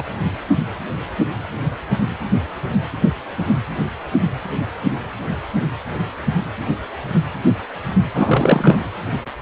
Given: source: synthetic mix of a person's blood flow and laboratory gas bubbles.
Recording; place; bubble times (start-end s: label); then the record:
Doppler ultrasound of blood flow; precordium
0.00-0.02 s: bubbles
8.15-8.83 s: bubbles
From the record:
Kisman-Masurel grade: 213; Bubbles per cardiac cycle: several, 3 to 8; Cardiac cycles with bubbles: 1 to 10%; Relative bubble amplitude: loud (0.450 to 0.775); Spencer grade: 1 (occasional bubble signal discernible with the cardiac motion signal, with majority of cardiac periods free of bubbles); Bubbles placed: anywhere in the cardiac cycle